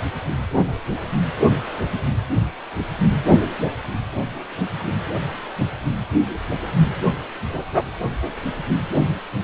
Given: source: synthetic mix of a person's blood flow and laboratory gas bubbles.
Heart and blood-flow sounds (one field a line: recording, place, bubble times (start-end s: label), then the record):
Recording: Doppler ultrasound of blood flow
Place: precordium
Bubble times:
no bubbles
From the record:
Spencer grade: 0 (complete lack of bubble signals)